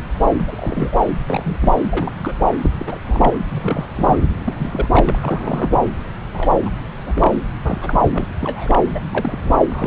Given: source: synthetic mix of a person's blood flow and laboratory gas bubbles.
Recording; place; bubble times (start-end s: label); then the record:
Doppler ultrasound of blood flow; subclavian vein
0.39-0.97 s: bubbles
1.27-1.57 s: bubbles
1.60-1.73 s: bubbles
1.89-2.34 s: bubbles
2.63-2.70 s: bubbles
2.73-3.00 s: bubbles
3.04-3.35 s: bubbles
3.48-3.88 s: bubbles
3.95-4.18 s: bubbles
4.46-4.54 s: bubbles
4.59-4.88 s: bubbles
4.91-5.16 s: bubbles
5.20-5.84 s: bubbles
6.34-6.52 s: bubbles
6.66-6.69 s: bubbles
7.06-7.41 s: bubbles
7.64-8.01 s: bubbles
8.13-8.28 s: bubbles
8.39-8.79 s: bubbles
8.92-9.00 s: bubbles
9.11-9.38 s: bubbles
9.42-9.53 s: bubbles
9.68-9.87 s: bubbles
From the record:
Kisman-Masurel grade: 242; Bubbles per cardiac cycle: several, 3 to 8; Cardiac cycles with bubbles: 100%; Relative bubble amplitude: moderate (0.250 to 0.450); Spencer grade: 3 (all of the cardiac periods contain showers or single bubble signals, but not dominating or overriding the cardiac motion signals); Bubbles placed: anywhere in the cardiac cycle